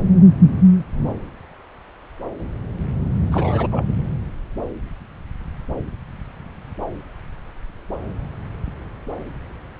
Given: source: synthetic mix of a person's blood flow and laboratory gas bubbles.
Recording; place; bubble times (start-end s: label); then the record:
Doppler ultrasound of blood flow; subclavian vein
3.31-3.85 s: bubbles
From the record:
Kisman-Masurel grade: 212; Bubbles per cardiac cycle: several, 3 to 8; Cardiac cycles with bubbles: 1 to 10%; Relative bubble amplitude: moderate (0.250 to 0.450); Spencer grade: 1 (occasional bubble signal discernible with the cardiac motion signal, with majority of cardiac periods free of bubbles); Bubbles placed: anywhere in the cardiac cycle